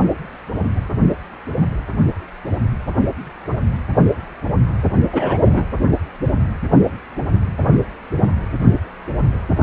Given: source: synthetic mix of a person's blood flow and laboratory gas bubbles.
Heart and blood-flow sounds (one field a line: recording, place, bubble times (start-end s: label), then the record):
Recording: Doppler ultrasound of blood flow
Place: precordium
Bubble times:
5.13-5.38 s: bubbles
5.42-5.63 s: bubbles
From the record:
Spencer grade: 1 (occasional bubble signal discernible with the cardiac motion signal, with majority of cardiac periods free of bubbles)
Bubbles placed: only in the low amplitude regions of the cardiac cycle